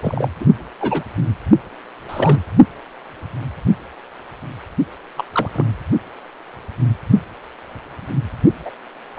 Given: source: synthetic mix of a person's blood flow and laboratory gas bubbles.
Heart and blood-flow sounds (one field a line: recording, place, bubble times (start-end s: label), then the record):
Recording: Doppler ultrasound of blood flow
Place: precordium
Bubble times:
0.01-0.29 s: bubbles
0.40-0.46 s: bubbles
0.80-1.03 s: bubbles
2.09-2.40 s: bubbles
5.17-5.25 s: bubbles
5.33-5.49 s: bubbles
5.53-5.65 s: bubbles
8.65-8.71 s: bubbles
9.16-9.19 s: bubbles
From the record:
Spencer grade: 2 (many but less than half of the cardiac periods contain bubble signals, singularly or in groups)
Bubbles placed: only in the low amplitude regions of the cardiac cycle